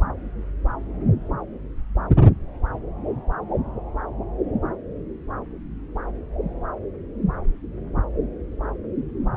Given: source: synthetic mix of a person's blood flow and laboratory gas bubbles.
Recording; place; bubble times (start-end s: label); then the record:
Doppler ultrasound of blood flow; subclavian vein
9.34-9.37 s: bubbles
From the record:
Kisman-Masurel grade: 211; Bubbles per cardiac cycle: several, 3 to 8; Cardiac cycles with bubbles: 1 to 10%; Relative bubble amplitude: barely perceptible (0.100 to 0.250); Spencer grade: 1 (occasional bubble signal discernible with the cardiac motion signal, with majority of cardiac periods free of bubbles); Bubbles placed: anywhere in the cardiac cycle